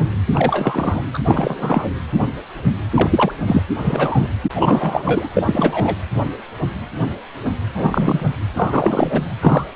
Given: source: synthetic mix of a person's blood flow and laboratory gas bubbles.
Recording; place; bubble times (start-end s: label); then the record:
Doppler ultrasound of blood flow; precordium
0.34-1.03 s: bubbles
1.14-1.19 s: bubbles
1.26-1.88 s: bubbles
2.94-3.32 s: bubbles
3.46-3.63 s: bubbles
3.77-4.28 s: bubbles
4.53-5.02 s: bubbles
5.05-5.29 s: bubbles
5.34-5.96 s: bubbles
7.75-8.27 s: bubbles
8.56-9.24 s: bubbles
9.40-9.64 s: bubbles
From the record:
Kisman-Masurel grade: 233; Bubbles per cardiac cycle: several, 3 to 8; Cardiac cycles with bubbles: 50 to 99%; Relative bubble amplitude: loud (0.450 to 0.775); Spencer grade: 3 (all of the cardiac periods contain showers or single bubble signals, but not dominating or overriding the cardiac motion signals); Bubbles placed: anywhere in the cardiac cycle